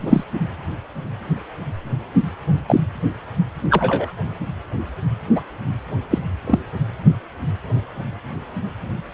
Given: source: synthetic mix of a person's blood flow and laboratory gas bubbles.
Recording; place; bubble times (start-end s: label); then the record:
Doppler ultrasound of blood flow; precordium
0.01-0.24 s: bubbles
2.67-2.81 s: bubbles
3.70-4.10 s: bubbles
5.35-5.42 s: bubbles
6.10-6.18 s: bubbles
6.46-6.58 s: bubbles
From the record:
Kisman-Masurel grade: 123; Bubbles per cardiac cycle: 1 to 2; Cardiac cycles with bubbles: 10 to 50%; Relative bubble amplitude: loud (0.450 to 0.775); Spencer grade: 2 (many but less than half of the cardiac periods contain bubble signals, singularly or in groups); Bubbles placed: anywhere in the cardiac cycle